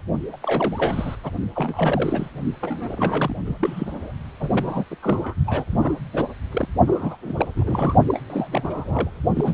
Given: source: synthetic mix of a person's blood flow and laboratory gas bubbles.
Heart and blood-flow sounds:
Doppler ultrasound of blood flow; precordium
0.33-0.37 s: bubbles
0.43-1.16 s: bubbles
1.24-1.31 s: bubbles
1.55-2.28 s: bubbles
2.60-3.35 s: bubbles
3.45-4.12 s: bubbles
4.40-4.85 s: bubbles
4.91-4.96 s: bubbles
5.03-5.34 s: bubbles
5.46-5.65 s: bubbles
5.67-5.96 s: bubbles
6.13-6.28 s: bubbles
6.51-6.68 s: bubbles
6.87-7.16 s: bubbles
7.25-7.33 s: bubbles
7.37-7.48 s: bubbles
7.56-7.95 s: bubbles
8.09-8.20 s: bubbles
8.29-9.10 s: bubbles
9.35-9.54 s: bubbles
From the record:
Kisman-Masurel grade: 332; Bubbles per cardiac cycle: rolling drumbeat, 9 or more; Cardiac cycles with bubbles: 50 to 99%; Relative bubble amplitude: moderate (0.250 to 0.450); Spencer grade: 3 (all of the cardiac periods contain showers or single bubble signals, but not dominating or overriding the cardiac motion signals); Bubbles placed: only in the low amplitude regions of the cardiac cycle

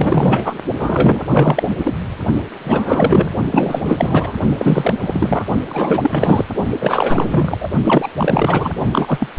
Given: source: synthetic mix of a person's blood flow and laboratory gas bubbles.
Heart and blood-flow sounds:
Doppler ultrasound of blood flow; precordium
0.00-0.54 s: bubbles
0.79-1.26 s: bubbles
1.29-1.94 s: bubbles
2.64-3.35 s: bubbles
3.52-4.37 s: bubbles
4.58-4.94 s: bubbles
5.01-5.45 s: bubbles
5.69-6.45 s: bubbles
6.79-7.69 s: bubbles
7.84-8.08 s: bubbles
8.17-8.74 s: bubbles
8.92-9.28 s: bubbles
From the record:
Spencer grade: 4 (maximum detectable bubble signal sounding continuously throughout systole and diastole of every cardiac period, and overriding the amplitude of the normal cardiac signals); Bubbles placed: only in the low amplitude regions of the cardiac cycle

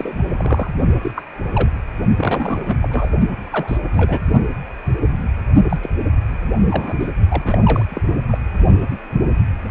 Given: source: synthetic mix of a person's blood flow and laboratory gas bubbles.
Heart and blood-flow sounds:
Doppler ultrasound of blood flow; precordium
0.00-0.71 s: bubbles
1.03-1.11 s: bubbles
1.15-1.23 s: bubbles
1.55-1.71 s: bubbles
2.16-3.09 s: bubbles
3.40-3.78 s: bubbles
3.93-4.21 s: bubbles
5.69-5.77 s: bubbles
5.82-5.90 s: bubbles
6.59-6.64 s: bubbles
6.69-7.10 s: bubbles
7.28-7.58 s: bubbles
7.63-7.86 s: bubbles
7.90-8.01 s: bubbles
8.29-8.38 s: bubbles
From the record:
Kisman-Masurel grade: 232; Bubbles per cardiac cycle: several, 3 to 8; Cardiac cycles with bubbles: 50 to 99%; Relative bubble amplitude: moderate (0.250 to 0.450); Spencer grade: 3 (all of the cardiac periods contain showers or single bubble signals, but not dominating or overriding the cardiac motion signals); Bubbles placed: only in the low amplitude regions of the cardiac cycle

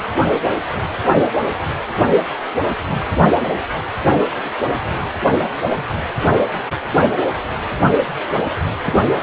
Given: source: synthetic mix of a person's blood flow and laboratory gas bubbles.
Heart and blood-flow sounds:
Doppler ultrasound of blood flow; precordium
8.84-9.04 s: bubbles
From the record:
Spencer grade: 1 (occasional bubble signal discernible with the cardiac motion signal, with majority of cardiac periods free of bubbles); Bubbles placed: anywhere in the cardiac cycle

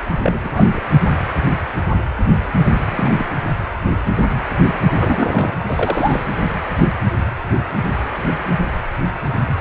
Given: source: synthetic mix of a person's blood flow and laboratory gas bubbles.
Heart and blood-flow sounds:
Doppler ultrasound of blood flow; precordium
0.23-0.38 s: bubbles
0.41-0.80 s: bubbles
2.53-2.60 s: bubbles
2.90-3.29 s: bubbles
4.95-5.54 s: bubbles
5.59-6.23 s: bubbles
From the record:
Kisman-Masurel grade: 222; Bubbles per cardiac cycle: several, 3 to 8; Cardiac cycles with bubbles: 10 to 50%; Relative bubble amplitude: moderate (0.250 to 0.450); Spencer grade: 2 (many but less than half of the cardiac periods contain bubble signals, singularly or in groups); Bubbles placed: anywhere in the cardiac cycle

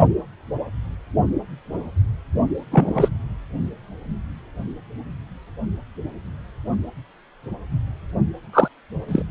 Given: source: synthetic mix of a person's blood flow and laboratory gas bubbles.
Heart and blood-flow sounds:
Doppler ultrasound of blood flow; precordium
2.71-3.08 s: bubbles
8.53-8.68 s: bubbles
9.09-9.23 s: bubbles
From the record:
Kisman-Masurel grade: 123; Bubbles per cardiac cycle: 1 to 2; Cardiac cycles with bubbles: 10 to 50%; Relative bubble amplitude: loud (0.450 to 0.775); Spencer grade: 2 (many but less than half of the cardiac periods contain bubble signals, singularly or in groups); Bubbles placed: only in the low amplitude regions of the cardiac cycle

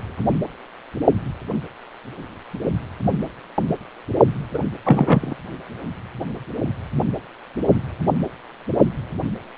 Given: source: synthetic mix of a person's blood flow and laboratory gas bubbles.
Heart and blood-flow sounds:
Doppler ultrasound of blood flow; precordium
4.54-4.58 s: bubbles
4.85-5.33 s: bubbles
From the record:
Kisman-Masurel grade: 113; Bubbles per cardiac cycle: 1 to 2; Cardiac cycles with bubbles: 1 to 10%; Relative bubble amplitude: loud (0.450 to 0.775); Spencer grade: 1 (occasional bubble signal discernible with the cardiac motion signal, with majority of cardiac periods free of bubbles); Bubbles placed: only in the low amplitude regions of the cardiac cycle

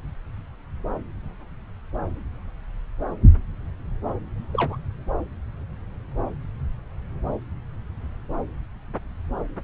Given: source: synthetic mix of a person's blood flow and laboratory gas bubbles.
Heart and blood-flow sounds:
Doppler ultrasound of blood flow; subclavian vein
4.53-4.77 s: bubbles
From the record:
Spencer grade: 1 (occasional bubble signal discernible with the cardiac motion signal, with majority of cardiac periods free of bubbles); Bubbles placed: anywhere in the cardiac cycle

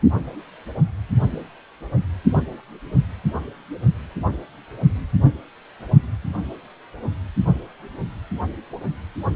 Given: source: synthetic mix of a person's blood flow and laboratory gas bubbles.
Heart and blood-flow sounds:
Doppler ultrasound of blood flow; precordium
2.33-2.60 s: bubbles
From the record:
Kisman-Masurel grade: 111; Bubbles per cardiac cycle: 1 to 2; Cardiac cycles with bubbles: 1 to 10%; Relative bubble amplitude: barely perceptible (0.100 to 0.250); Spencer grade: 1 (occasional bubble signal discernible with the cardiac motion signal, with majority of cardiac periods free of bubbles); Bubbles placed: only in the low amplitude regions of the cardiac cycle

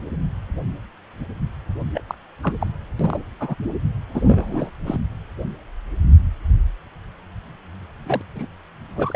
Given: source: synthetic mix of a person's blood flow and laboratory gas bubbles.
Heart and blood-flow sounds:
Doppler ultrasound of blood flow; precordium
1.94-2.02 s: bubbles
2.08-2.15 s: bubbles
2.43-2.52 s: bubbles
2.60-2.67 s: bubbles
2.99-3.20 s: bubbles
3.40-3.55 s: bubbles
4.14-4.71 s: bubbles
4.85-4.99 s: bubbles
8.06-8.21 s: bubbles
8.35-8.46 s: bubbles
8.96-9.16 s: bubbles
From the record:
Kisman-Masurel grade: 232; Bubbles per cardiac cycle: several, 3 to 8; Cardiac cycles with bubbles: 50 to 99%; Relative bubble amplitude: moderate (0.250 to 0.450); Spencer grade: 3 (all of the cardiac periods contain showers or single bubble signals, but not dominating or overriding the cardiac motion signals); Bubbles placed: anywhere in the cardiac cycle

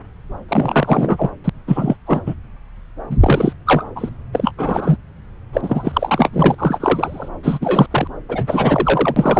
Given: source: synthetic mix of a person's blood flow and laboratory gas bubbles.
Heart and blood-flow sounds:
Doppler ultrasound of blood flow; subclavian vein
0.48-1.30 s: bubbles
1.44-1.50 s: bubbles
1.67-1.96 s: bubbles
2.06-2.21 s: bubbles
2.26-2.34 s: bubbles
3.10-3.18 s: bubbles
3.20-3.53 s: bubbles
3.66-3.85 s: bubbles
3.96-4.09 s: bubbles
4.32-4.51 s: bubbles
4.57-4.98 s: bubbles
5.53-6.29 s: bubbles
6.32-6.55 s: bubbles
6.58-7.28 s: bubbles
7.43-7.58 s: bubbles
7.61-7.87 s: bubbles
7.90-8.07 s: bubbles
8.29-9.39 s: bubbles
From the record:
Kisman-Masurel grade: 343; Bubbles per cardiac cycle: rolling drumbeat, 9 or more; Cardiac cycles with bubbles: 100%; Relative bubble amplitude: loud (0.450 to 0.775); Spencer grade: 3 (all of the cardiac periods contain showers or single bubble signals, but not dominating or overriding the cardiac motion signals); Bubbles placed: anywhere in the cardiac cycle

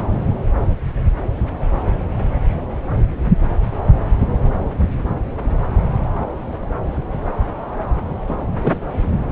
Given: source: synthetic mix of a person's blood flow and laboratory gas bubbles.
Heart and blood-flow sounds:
Doppler ultrasound of blood flow; subclavian vein
8.27-8.36 s: bubbles
8.61-8.81 s: bubbles
From the record:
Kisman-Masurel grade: 212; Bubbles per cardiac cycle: several, 3 to 8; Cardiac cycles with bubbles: 1 to 10%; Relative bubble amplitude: moderate (0.250 to 0.450); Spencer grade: 1 (occasional bubble signal discernible with the cardiac motion signal, with majority of cardiac periods free of bubbles); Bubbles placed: anywhere in the cardiac cycle

